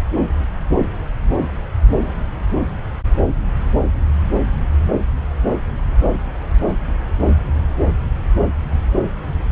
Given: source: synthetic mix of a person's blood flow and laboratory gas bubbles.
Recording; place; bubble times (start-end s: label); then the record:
Doppler ultrasound of blood flow; subclavian vein
no bubbles
From the record:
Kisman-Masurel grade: 000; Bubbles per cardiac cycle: 0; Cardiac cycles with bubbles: 0%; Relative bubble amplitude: no bubbles discernible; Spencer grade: 0 (complete lack of bubble signals)